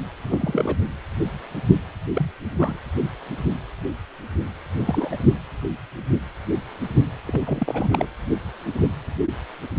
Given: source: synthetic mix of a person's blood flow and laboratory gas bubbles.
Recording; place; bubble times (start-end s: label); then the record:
Doppler ultrasound of blood flow; precordium
0.23-0.77 s: bubbles
2.14-2.31 s: bubbles
2.58-2.77 s: bubbles
4.78-5.17 s: bubbles
7.25-8.07 s: bubbles
From the record:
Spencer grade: 2 (many but less than half of the cardiac periods contain bubble signals, singularly or in groups); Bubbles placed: anywhere in the cardiac cycle